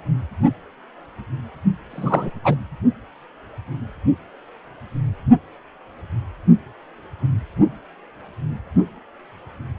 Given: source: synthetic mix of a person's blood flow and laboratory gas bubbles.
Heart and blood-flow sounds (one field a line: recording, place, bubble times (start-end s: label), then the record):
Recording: Doppler ultrasound of blood flow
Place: precordium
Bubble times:
1.90-2.30 s: bubbles
2.44-2.55 s: bubbles
From the record:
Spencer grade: 1 (occasional bubble signal discernible with the cardiac motion signal, with majority of cardiac periods free of bubbles)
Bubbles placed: only in the low amplitude regions of the cardiac cycle